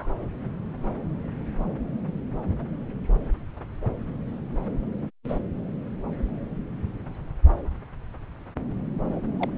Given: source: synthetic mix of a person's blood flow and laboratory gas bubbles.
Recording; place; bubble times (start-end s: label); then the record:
Doppler ultrasound of blood flow; subclavian vein
0.00-0.11 s: bubbles
5.29-5.38 s: bubbles
9.12-9.19 s: bubbles
9.39-9.50 s: bubbles
From the record:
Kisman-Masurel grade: 121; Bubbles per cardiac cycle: 1 to 2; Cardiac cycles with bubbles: 10 to 50%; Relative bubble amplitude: barely perceptible (0.100 to 0.250); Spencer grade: 2 (many but less than half of the cardiac periods contain bubble signals, singularly or in groups); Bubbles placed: anywhere in the cardiac cycle